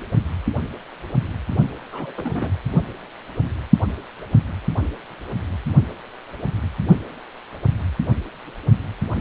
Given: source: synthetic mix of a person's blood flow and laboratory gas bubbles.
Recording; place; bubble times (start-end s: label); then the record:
Doppler ultrasound of blood flow; precordium
1.92-2.50 s: bubbles
From the record:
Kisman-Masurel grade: 211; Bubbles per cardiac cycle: several, 3 to 8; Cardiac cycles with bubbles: 1 to 10%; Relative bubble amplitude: barely perceptible (0.100 to 0.250); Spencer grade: 1 (occasional bubble signal discernible with the cardiac motion signal, with majority of cardiac periods free of bubbles); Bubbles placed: only in the low amplitude regions of the cardiac cycle